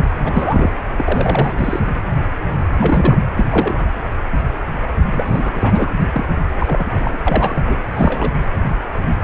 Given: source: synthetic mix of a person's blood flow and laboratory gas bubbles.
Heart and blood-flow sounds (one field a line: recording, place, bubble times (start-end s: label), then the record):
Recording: Doppler ultrasound of blood flow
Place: precordium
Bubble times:
0.00-0.06 s: bubbles
0.24-0.71 s: bubbles
0.98-1.54 s: bubbles
1.57-1.80 s: bubbles
2.79-3.19 s: bubbles
3.36-3.45 s: bubbles
3.50-3.90 s: bubbles
5.13-5.96 s: bubbles
6.13-6.26 s: bubbles
6.58-7.17 s: bubbles
7.26-7.77 s: bubbles
7.92-8.32 s: bubbles
From the record:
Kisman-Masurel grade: 332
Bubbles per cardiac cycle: rolling drumbeat, 9 or more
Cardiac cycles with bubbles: 50 to 99%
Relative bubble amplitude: moderate (0.250 to 0.450)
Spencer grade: 3 (all of the cardiac periods contain showers or single bubble signals, but not dominating or overriding the cardiac motion signals)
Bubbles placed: anywhere in the cardiac cycle